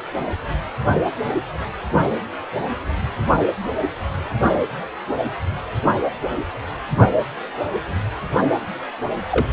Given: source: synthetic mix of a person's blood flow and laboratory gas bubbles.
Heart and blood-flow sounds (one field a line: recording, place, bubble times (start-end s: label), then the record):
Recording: Doppler ultrasound of blood flow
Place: precordium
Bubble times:
9.31-9.47 s: bubbles
From the record:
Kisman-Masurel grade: 122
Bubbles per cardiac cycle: 1 to 2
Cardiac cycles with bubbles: 10 to 50%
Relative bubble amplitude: moderate (0.250 to 0.450)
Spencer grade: 2 (many but less than half of the cardiac periods contain bubble signals, singularly or in groups)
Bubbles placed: only in the low amplitude regions of the cardiac cycle